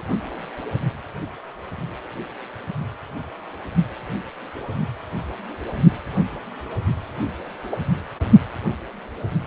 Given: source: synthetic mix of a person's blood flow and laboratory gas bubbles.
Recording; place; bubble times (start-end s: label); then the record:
Doppler ultrasound of blood flow; precordium
7.71-7.77 s: bubbles
From the record:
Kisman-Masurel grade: 113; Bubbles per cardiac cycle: 1 to 2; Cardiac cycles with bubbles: 1 to 10%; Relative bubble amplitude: loud (0.450 to 0.775); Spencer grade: 1 (occasional bubble signal discernible with the cardiac motion signal, with majority of cardiac periods free of bubbles); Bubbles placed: only in the low amplitude regions of the cardiac cycle